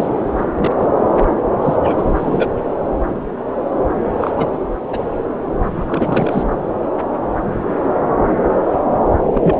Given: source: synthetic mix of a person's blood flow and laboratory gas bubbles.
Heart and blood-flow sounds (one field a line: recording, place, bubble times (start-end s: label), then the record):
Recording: Doppler ultrasound of blood flow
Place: subclavian vein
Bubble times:
0.00-0.13 s: bubbles
0.37-0.48 s: bubbles
0.55-0.74 s: bubbles
0.78-0.87 s: bubbles
1.62-1.76 s: bubbles
1.83-2.51 s: bubbles
4.20-4.31 s: bubbles
4.35-4.57 s: bubbles
4.85-4.99 s: bubbles
5.75-6.43 s: bubbles
9.32-9.60 s: bubbles
From the record:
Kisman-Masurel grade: 232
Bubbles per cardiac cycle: several, 3 to 8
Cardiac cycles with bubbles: 50 to 99%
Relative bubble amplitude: moderate (0.250 to 0.450)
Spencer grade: 3 (all of the cardiac periods contain showers or single bubble signals, but not dominating or overriding the cardiac motion signals)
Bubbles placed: anywhere in the cardiac cycle